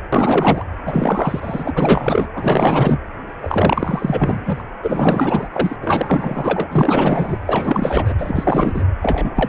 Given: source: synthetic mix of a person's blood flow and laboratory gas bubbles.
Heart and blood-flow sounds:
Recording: Doppler ultrasound of blood flow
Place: precordium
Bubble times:
0.13-0.65 s: bubbles
0.85-2.27 s: bubbles
2.35-2.98 s: bubbles
3.42-4.62 s: bubbles
4.83-5.48 s: bubbles
5.53-5.76 s: bubbles
5.82-6.68 s: bubbles
6.71-7.38 s: bubbles
7.46-8.13 s: bubbles
8.18-8.84 s: bubbles
9.02-9.49 s: bubbles
From the record:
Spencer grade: 4 (maximum detectable bubble signal sounding continuously throughout systole and diastole of every cardiac period, and overriding the amplitude of the normal cardiac signals)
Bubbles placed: anywhere in the cardiac cycle

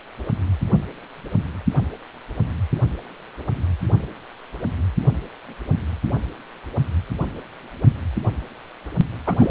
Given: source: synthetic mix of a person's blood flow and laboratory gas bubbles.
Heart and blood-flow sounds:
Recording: Doppler ultrasound of blood flow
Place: precordium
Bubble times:
9.27-9.50 s: bubbles
From the record:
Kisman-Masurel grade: 212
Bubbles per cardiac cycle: several, 3 to 8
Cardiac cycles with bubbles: 1 to 10%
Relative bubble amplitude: moderate (0.250 to 0.450)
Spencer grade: 1 (occasional bubble signal discernible with the cardiac motion signal, with majority of cardiac periods free of bubbles)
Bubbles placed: only in the low amplitude regions of the cardiac cycle

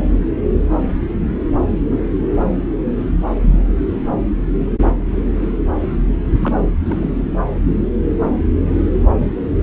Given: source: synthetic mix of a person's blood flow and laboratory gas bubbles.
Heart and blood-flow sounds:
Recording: Doppler ultrasound of blood flow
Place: subclavian vein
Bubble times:
6.40-6.56 s: bubbles
6.85-7.23 s: bubbles
From the record:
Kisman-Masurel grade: 221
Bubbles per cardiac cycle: several, 3 to 8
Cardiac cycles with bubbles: 10 to 50%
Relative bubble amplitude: barely perceptible (0.100 to 0.250)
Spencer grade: 2 (many but less than half of the cardiac periods contain bubble signals, singularly or in groups)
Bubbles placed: anywhere in the cardiac cycle

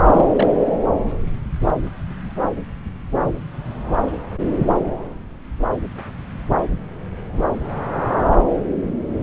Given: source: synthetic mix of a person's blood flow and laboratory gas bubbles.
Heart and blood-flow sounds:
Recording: Doppler ultrasound of blood flow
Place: subclavian vein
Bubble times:
0.06-0.25 s: bubbles
0.34-0.47 s: bubbles
From the record:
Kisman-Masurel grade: 212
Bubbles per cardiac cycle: several, 3 to 8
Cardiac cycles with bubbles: 1 to 10%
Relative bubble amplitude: moderate (0.250 to 0.450)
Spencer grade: 1 (occasional bubble signal discernible with the cardiac motion signal, with majority of cardiac periods free of bubbles)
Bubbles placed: anywhere in the cardiac cycle

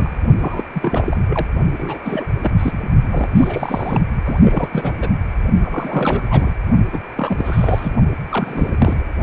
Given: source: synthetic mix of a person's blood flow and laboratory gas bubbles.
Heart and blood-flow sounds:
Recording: Doppler ultrasound of blood flow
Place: precordium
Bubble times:
0.00-0.16 s: bubbles
0.40-0.65 s: bubbles
0.73-1.47 s: bubbles
1.78-1.99 s: bubbles
2.03-2.24 s: bubbles
2.43-2.52 s: bubbles
2.55-2.90 s: bubbles
3.10-3.29 s: bubbles
3.35-4.00 s: bubbles
4.25-4.93 s: bubbles
4.97-5.09 s: bubbles
5.62-6.22 s: bubbles
6.29-6.51 s: bubbles
6.92-7.00 s: bubbles
7.15-7.96 s: bubbles
8.29-9.04 s: bubbles
From the record:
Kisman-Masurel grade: 342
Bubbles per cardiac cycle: rolling drumbeat, 9 or more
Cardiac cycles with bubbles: 100%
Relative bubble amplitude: moderate (0.250 to 0.450)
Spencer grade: 3 (all of the cardiac periods contain showers or single bubble signals, but not dominating or overriding the cardiac motion signals)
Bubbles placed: only in the low amplitude regions of the cardiac cycle

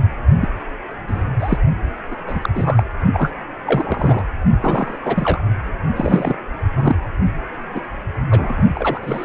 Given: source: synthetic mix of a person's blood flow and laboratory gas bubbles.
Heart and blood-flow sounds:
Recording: Doppler ultrasound of blood flow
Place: precordium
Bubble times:
0.40-0.48 s: bubbles
1.08-1.24 s: bubbles
1.39-1.58 s: bubbles
2.10-2.16 s: bubbles
2.27-2.50 s: bubbles
2.54-2.83 s: bubbles
3.13-3.31 s: bubbles
3.65-4.22 s: bubbles
4.60-4.99 s: bubbles
5.05-5.44 s: bubbles
5.96-6.37 s: bubbles
6.75-6.96 s: bubbles
7.75-7.80 s: bubbles
8.30-8.61 s: bubbles
8.73-9.24 s: bubbles
From the record:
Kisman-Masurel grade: 243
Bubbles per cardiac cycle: several, 3 to 8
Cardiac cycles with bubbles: 100%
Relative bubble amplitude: loud (0.450 to 0.775)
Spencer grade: 3 (all of the cardiac periods contain showers or single bubble signals, but not dominating or overriding the cardiac motion signals)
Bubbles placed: only in the low amplitude regions of the cardiac cycle

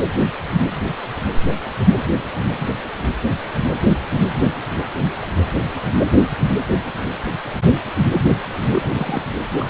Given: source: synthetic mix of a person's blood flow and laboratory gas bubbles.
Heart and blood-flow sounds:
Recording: Doppler ultrasound of blood flow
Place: precordium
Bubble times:
8.71-9.30 s: bubbles
9.59-9.70 s: bubbles
From the record:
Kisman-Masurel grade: 212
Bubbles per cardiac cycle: several, 3 to 8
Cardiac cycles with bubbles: 1 to 10%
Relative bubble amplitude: moderate (0.250 to 0.450)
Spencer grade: 1 (occasional bubble signal discernible with the cardiac motion signal, with majority of cardiac periods free of bubbles)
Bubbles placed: anywhere in the cardiac cycle

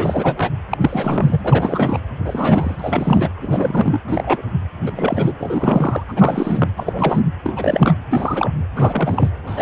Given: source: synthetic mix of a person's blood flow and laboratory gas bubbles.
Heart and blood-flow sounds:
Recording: Doppler ultrasound of blood flow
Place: precordium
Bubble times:
0.00-0.49 s: bubbles
0.69-0.78 s: bubbles
0.80-2.00 s: bubbles
2.25-3.30 s: bubbles
3.42-3.99 s: bubbles
4.08-4.42 s: bubbles
4.81-5.33 s: bubbles
5.39-6.03 s: bubbles
6.08-6.71 s: bubbles
6.76-7.33 s: bubbles
7.43-7.94 s: bubbles
8.09-8.53 s: bubbles
8.75-9.31 s: bubbles
9.46-9.62 s: bubbles
From the record:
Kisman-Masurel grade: 342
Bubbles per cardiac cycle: rolling drumbeat, 9 or more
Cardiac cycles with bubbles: 100%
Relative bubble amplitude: moderate (0.250 to 0.450)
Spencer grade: 3 (all of the cardiac periods contain showers or single bubble signals, but not dominating or overriding the cardiac motion signals)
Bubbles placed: anywhere in the cardiac cycle

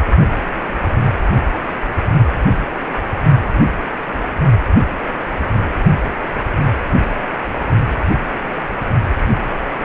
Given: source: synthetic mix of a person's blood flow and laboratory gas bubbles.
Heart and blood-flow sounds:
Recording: Doppler ultrasound of blood flow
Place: precordium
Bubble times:
no bubbles
From the record:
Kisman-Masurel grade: 000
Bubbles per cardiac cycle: 0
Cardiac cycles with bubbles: 0%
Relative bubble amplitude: no bubbles discernible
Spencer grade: 0 (complete lack of bubble signals)

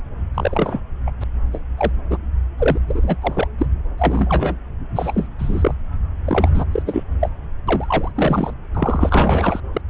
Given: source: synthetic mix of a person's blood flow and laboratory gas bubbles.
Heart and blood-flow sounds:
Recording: Doppler ultrasound of blood flow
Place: subclavian vein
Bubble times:
0.34-0.81 s: bubbles
1.06-1.10 s: bubbles
1.21-1.24 s: bubbles
1.51-1.62 s: bubbles
1.77-1.92 s: bubbles
2.10-2.17 s: bubbles
2.58-2.77 s: bubbles
2.88-3.17 s: bubbles
3.21-3.48 s: bubbles
3.58-3.67 s: bubbles
3.98-4.55 s: bubbles
4.94-5.28 s: bubbles
5.38-5.75 s: bubbles
6.25-6.64 s: bubbles
6.71-6.83 s: bubbles
6.86-7.04 s: bubbles
7.20-7.29 s: bubbles
7.67-8.11 s: bubbles
8.14-8.54 s: bubbles
8.74-9.60 s: bubbles
9.73-9.81 s: bubbles
From the record:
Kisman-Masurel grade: 233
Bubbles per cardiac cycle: several, 3 to 8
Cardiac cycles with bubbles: 50 to 99%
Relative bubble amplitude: loud (0.450 to 0.775)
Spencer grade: 3 (all of the cardiac periods contain showers or single bubble signals, but not dominating or overriding the cardiac motion signals)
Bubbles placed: anywhere in the cardiac cycle

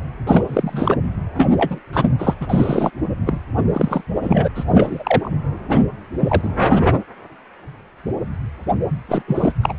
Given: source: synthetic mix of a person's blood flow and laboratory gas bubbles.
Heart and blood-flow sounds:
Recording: Doppler ultrasound of blood flow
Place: precordium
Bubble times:
0.27-0.43 s: bubbles
0.46-0.98 s: bubbles
1.34-1.78 s: bubbles
1.93-2.14 s: bubbles
2.19-2.34 s: bubbles
2.40-2.91 s: bubbles
3.26-3.41 s: bubbles
3.73-4.01 s: bubbles
4.21-4.50 s: bubbles
4.54-4.64 s: bubbles
4.68-5.29 s: bubbles
5.68-5.80 s: bubbles
6.19-6.52 s: bubbles
9.08-9.23 s: bubbles
9.27-9.53 s: bubbles
9.62-9.73 s: bubbles
From the record:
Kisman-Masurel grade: 233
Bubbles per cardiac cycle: several, 3 to 8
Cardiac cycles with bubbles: 50 to 99%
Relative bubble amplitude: loud (0.450 to 0.775)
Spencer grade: 3 (all of the cardiac periods contain showers or single bubble signals, but not dominating or overriding the cardiac motion signals)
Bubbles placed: anywhere in the cardiac cycle

